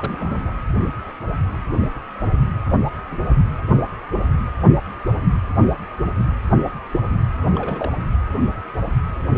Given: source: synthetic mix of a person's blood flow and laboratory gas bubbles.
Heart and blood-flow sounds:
Doppler ultrasound of blood flow; precordium
0.00-0.50 s: bubbles
7.38-7.91 s: bubbles
From the record:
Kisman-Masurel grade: 221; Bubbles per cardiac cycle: several, 3 to 8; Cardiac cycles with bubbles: 10 to 50%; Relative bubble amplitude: barely perceptible (0.100 to 0.250); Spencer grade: 2 (many but less than half of the cardiac periods contain bubble signals, singularly or in groups); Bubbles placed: anywhere in the cardiac cycle

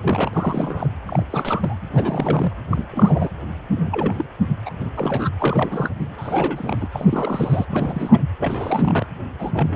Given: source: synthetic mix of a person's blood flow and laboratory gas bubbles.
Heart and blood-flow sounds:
Doppler ultrasound of blood flow; precordium
0.02-0.30 s: bubbles
0.33-0.88 s: bubbles
1.05-1.23 s: bubbles
1.30-1.78 s: bubbles
1.94-2.53 s: bubbles
2.69-2.87 s: bubbles
2.91-3.30 s: bubbles
3.71-4.25 s: bubbles
4.65-4.73 s: bubbles
4.79-4.88 s: bubbles
4.97-5.29 s: bubbles
5.38-5.90 s: bubbles
5.97-6.08 s: bubbles
6.17-6.88 s: bubbles
6.92-7.65 s: bubbles
7.71-8.22 s: bubbles
8.39-9.06 s: bubbles
9.38-9.76 s: bubbles
From the record:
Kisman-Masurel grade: 342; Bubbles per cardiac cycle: rolling drumbeat, 9 or more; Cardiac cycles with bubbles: 100%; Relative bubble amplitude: moderate (0.250 to 0.450); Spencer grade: 3 (all of the cardiac periods contain showers or single bubble signals, but not dominating or overriding the cardiac motion signals); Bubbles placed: anywhere in the cardiac cycle

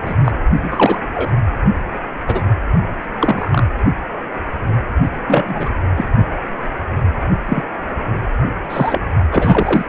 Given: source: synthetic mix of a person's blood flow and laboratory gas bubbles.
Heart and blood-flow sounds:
Doppler ultrasound of blood flow; precordium
0.05-0.14 s: bubbles
0.24-0.32 s: bubbles
0.62-1.04 s: bubbles
1.14-1.31 s: bubbles
2.27-2.42 s: bubbles
3.20-3.67 s: bubbles
5.27-5.69 s: bubbles
5.97-6.05 s: bubbles
7.46-7.62 s: bubbles
8.69-9.01 s: bubbles
9.32-9.85 s: bubbles
From the record:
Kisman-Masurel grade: 233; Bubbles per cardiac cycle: several, 3 to 8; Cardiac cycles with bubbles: 50 to 99%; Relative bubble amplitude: loud (0.450 to 0.775); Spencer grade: 3 (all of the cardiac periods contain showers or single bubble signals, but not dominating or overriding the cardiac motion signals); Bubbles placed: only in the low amplitude regions of the cardiac cycle

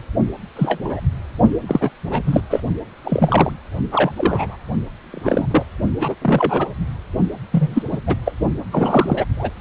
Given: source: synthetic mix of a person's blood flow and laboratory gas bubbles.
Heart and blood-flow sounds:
Doppler ultrasound of blood flow; precordium
0.55-0.81 s: bubbles
0.84-0.99 s: bubbles
1.67-1.91 s: bubbles
2.09-2.21 s: bubbles
2.25-2.41 s: bubbles
2.50-2.60 s: bubbles
3.04-3.52 s: bubbles
3.91-4.12 s: bubbles
4.16-4.58 s: bubbles
5.01-5.47 s: bubbles
5.51-5.65 s: bubbles
5.99-6.15 s: bubbles
6.22-6.73 s: bubbles
7.52-7.83 s: bubbles
7.91-7.99 s: bubbles
8.06-8.16 s: bubbles
8.25-8.32 s: bubbles
8.71-9.25 s: bubbles
9.37-9.50 s: bubbles
From the record:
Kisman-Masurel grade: 243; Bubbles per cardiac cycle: several, 3 to 8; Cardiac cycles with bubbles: 100%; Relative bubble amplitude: loud (0.450 to 0.775); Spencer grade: 3 (all of the cardiac periods contain showers or single bubble signals, but not dominating or overriding the cardiac motion signals); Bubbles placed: only in the low amplitude regions of the cardiac cycle

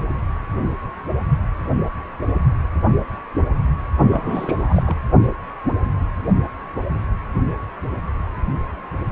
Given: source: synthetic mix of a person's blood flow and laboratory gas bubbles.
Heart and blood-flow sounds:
Doppler ultrasound of blood flow; precordium
4.10-4.83 s: bubbles
4.86-4.96 s: bubbles
From the record:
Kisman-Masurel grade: 212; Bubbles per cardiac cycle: several, 3 to 8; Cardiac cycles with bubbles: 1 to 10%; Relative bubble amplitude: moderate (0.250 to 0.450); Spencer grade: 1 (occasional bubble signal discernible with the cardiac motion signal, with majority of cardiac periods free of bubbles); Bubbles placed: anywhere in the cardiac cycle

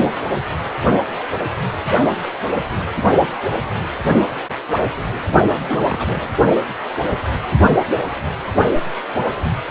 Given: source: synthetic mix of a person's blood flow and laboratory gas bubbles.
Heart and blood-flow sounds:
Doppler ultrasound of blood flow; precordium
5.56-6.36 s: bubbles
From the record:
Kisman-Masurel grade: 211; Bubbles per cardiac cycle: several, 3 to 8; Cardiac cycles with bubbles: 1 to 10%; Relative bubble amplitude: barely perceptible (0.100 to 0.250); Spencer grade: 1 (occasional bubble signal discernible with the cardiac motion signal, with majority of cardiac periods free of bubbles); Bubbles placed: only in the low amplitude regions of the cardiac cycle

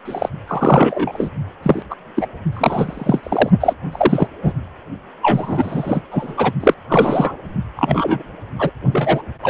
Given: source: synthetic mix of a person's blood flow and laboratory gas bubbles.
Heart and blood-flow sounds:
Doppler ultrasound of blood flow; precordium
0.05-0.29 s: bubbles
0.47-1.29 s: bubbles
1.62-1.83 s: bubbles
1.90-1.95 s: bubbles
2.16-2.27 s: bubbles
2.52-3.50 s: bubbles
3.60-3.73 s: bubbles
3.92-4.27 s: bubbles
4.42-4.52 s: bubbles
5.22-6.01 s: bubbles
6.11-6.52 s: bubbles
6.60-6.74 s: bubbles
6.89-7.36 s: bubbles
7.75-8.23 s: bubbles
8.59-8.71 s: bubbles
8.92-9.22 s: bubbles
9.42-9.50 s: bubbles
From the record:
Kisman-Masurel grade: 243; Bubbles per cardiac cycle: several, 3 to 8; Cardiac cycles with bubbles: 100%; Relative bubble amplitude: loud (0.450 to 0.775); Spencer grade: 3 (all of the cardiac periods contain showers or single bubble signals, but not dominating or overriding the cardiac motion signals); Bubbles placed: only in the low amplitude regions of the cardiac cycle

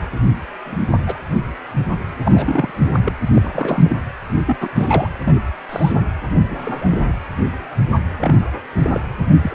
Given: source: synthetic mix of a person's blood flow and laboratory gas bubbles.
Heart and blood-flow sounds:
Doppler ultrasound of blood flow; precordium
0.00-0.11 s: bubbles
0.65-0.77 s: bubbles
0.90-0.98 s: bubbles
1.06-1.18 s: bubbles
2.25-2.71 s: bubbles
2.77-3.00 s: bubbles
3.04-3.12 s: bubbles
3.34-3.96 s: bubbles
4.46-4.57 s: bubbles
4.60-4.69 s: bubbles
4.75-5.09 s: bubbles
5.25-5.41 s: bubbles
5.69-6.02 s: bubbles
6.50-7.13 s: bubbles
8.19-8.35 s: bubbles
8.83-9.01 s: bubbles
9.34-9.55 s: bubbles
From the record:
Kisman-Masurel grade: 232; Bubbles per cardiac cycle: several, 3 to 8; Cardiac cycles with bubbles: 50 to 99%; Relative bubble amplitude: moderate (0.250 to 0.450); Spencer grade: 3 (all of the cardiac periods contain showers or single bubble signals, but not dominating or overriding the cardiac motion signals); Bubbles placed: anywhere in the cardiac cycle

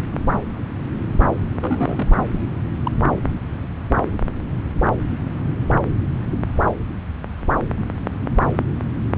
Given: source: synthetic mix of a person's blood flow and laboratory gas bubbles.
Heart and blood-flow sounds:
Doppler ultrasound of blood flow; subclavian vein
1.60-2.11 s: bubbles
2.30-2.39 s: bubbles
2.85-2.91 s: bubbles
From the record:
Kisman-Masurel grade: 122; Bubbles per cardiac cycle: 1 to 2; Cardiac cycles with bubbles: 10 to 50%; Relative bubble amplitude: moderate (0.250 to 0.450); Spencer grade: 2 (many but less than half of the cardiac periods contain bubble signals, singularly or in groups); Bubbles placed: anywhere in the cardiac cycle

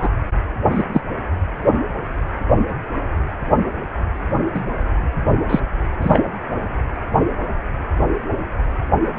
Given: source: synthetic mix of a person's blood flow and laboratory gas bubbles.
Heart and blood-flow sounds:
Doppler ultrasound of blood flow; precordium
0.00-0.09 s: bubbles
0.71-0.83 s: bubbles
0.93-1.01 s: bubbles
4.54-4.62 s: bubbles
5.49-5.59 s: bubbles
6.00-6.24 s: bubbles
From the record:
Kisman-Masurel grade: 123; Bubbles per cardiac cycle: 1 to 2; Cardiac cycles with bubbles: 10 to 50%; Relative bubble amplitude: loud (0.450 to 0.775); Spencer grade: 2 (many but less than half of the cardiac periods contain bubble signals, singularly or in groups); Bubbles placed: anywhere in the cardiac cycle

